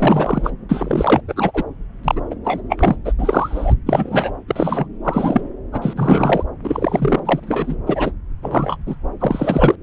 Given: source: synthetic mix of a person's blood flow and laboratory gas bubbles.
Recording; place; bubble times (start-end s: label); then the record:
Doppler ultrasound of blood flow; subclavian vein
0.00-0.51 s: bubbles
0.69-1.21 s: bubbles
1.28-1.64 s: bubbles
2.03-2.21 s: bubbles
2.30-2.35 s: bubbles
2.44-2.61 s: bubbles
2.69-2.96 s: bubbles
3.05-3.12 s: bubbles
3.18-3.73 s: bubbles
3.86-4.31 s: bubbles
4.48-4.86 s: bubbles
5.04-5.41 s: bubbles
5.72-6.43 s: bubbles
6.63-7.20 s: bubbles
7.25-7.40 s: bubbles
7.43-7.75 s: bubbles
7.86-8.12 s: bubbles
8.42-8.77 s: bubbles
8.87-8.95 s: bubbles
9.20-9.76 s: bubbles
From the record:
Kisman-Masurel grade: 243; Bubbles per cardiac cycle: several, 3 to 8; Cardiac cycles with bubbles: 100%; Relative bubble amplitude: loud (0.450 to 0.775); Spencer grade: 3 (all of the cardiac periods contain showers or single bubble signals, but not dominating or overriding the cardiac motion signals); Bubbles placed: anywhere in the cardiac cycle